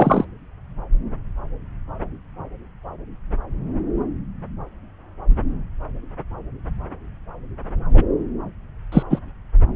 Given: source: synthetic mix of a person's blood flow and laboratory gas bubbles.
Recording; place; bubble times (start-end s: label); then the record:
Doppler ultrasound of blood flow; subclavian vein
0.00-0.25 s: bubbles
7.93-8.03 s: bubbles
8.92-9.03 s: bubbles
9.09-9.19 s: bubbles
From the record:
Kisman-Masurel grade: 123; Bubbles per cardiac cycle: 1 to 2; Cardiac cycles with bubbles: 10 to 50%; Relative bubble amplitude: loud (0.450 to 0.775); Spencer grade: 2 (many but less than half of the cardiac periods contain bubble signals, singularly or in groups); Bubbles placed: anywhere in the cardiac cycle